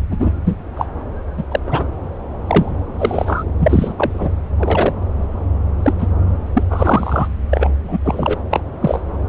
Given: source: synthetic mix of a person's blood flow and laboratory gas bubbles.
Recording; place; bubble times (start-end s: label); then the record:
Doppler ultrasound of blood flow; subclavian vein
0.11-0.30 s: bubbles
0.45-0.56 s: bubbles
0.77-0.85 s: bubbles
1.36-1.44 s: bubbles
1.51-1.60 s: bubbles
1.67-1.84 s: bubbles
2.47-2.73 s: bubbles
2.98-3.44 s: bubbles
3.60-3.94 s: bubbles
3.97-4.31 s: bubbles
4.59-4.94 s: bubbles
5.82-5.93 s: bubbles
5.98-6.06 s: bubbles
6.55-6.63 s: bubbles
6.69-7.27 s: bubbles
7.49-7.72 s: bubbles
7.84-7.97 s: bubbles
8.03-8.34 s: bubbles
8.50-8.61 s: bubbles
8.80-9.01 s: bubbles
From the record:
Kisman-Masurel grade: 233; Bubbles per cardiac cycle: several, 3 to 8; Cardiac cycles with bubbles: 50 to 99%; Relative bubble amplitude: loud (0.450 to 0.775); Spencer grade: 3 (all of the cardiac periods contain showers or single bubble signals, but not dominating or overriding the cardiac motion signals); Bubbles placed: anywhere in the cardiac cycle